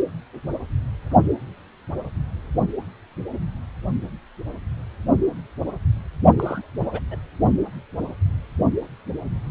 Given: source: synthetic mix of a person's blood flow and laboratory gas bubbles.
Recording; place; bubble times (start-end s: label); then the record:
Doppler ultrasound of blood flow; precordium
6.38-6.66 s: bubbles
6.79-7.00 s: bubbles
7.10-7.16 s: bubbles
From the record:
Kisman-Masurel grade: 211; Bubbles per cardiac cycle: several, 3 to 8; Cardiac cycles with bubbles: 1 to 10%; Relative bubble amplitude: barely perceptible (0.100 to 0.250); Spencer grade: 1 (occasional bubble signal discernible with the cardiac motion signal, with majority of cardiac periods free of bubbles); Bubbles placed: only in the low amplitude regions of the cardiac cycle